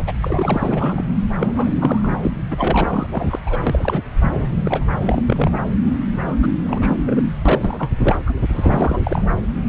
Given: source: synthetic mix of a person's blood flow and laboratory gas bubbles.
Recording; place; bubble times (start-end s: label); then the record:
Doppler ultrasound of blood flow; subclavian vein
0.00-0.03 s: bubbles
0.07-0.12 s: bubbles
0.22-1.05 s: bubbles
1.38-2.18 s: bubbles
2.21-2.31 s: bubbles
2.50-3.07 s: bubbles
3.11-3.39 s: bubbles
3.45-3.60 s: bubbles
3.62-4.01 s: bubbles
4.21-4.50 s: bubbles
4.63-4.85 s: bubbles
4.89-5.22 s: bubbles
5.26-5.61 s: bubbles
6.26-6.36 s: bubbles
6.42-6.53 s: bubbles
6.66-7.22 s: bubbles
7.45-7.91 s: bubbles
7.99-8.16 s: bubbles
8.26-8.33 s: bubbles
8.49-9.26 s: bubbles
From the record:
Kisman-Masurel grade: 342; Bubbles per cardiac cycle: rolling drumbeat, 9 or more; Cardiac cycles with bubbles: 100%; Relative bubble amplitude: moderate (0.250 to 0.450); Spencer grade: 3 (all of the cardiac periods contain showers or single bubble signals, but not dominating or overriding the cardiac motion signals); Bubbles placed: anywhere in the cardiac cycle